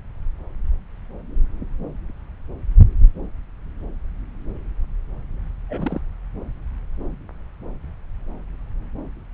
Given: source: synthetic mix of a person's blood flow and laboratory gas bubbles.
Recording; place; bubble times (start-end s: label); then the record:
Doppler ultrasound of blood flow; subclavian vein
5.69-6.02 s: bubbles
From the record:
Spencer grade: 2 (many but less than half of the cardiac periods contain bubble signals, singularly or in groups); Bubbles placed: anywhere in the cardiac cycle